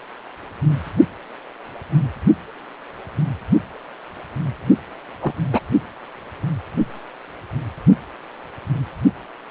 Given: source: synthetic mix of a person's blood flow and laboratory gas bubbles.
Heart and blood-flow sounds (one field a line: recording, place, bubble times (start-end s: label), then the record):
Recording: Doppler ultrasound of blood flow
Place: precordium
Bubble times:
5.21-5.33 s: bubbles
5.52-5.60 s: bubbles
From the record:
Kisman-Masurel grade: 112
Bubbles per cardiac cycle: 1 to 2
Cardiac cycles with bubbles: 1 to 10%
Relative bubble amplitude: moderate (0.250 to 0.450)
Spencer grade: 1 (occasional bubble signal discernible with the cardiac motion signal, with majority of cardiac periods free of bubbles)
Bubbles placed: only in the low amplitude regions of the cardiac cycle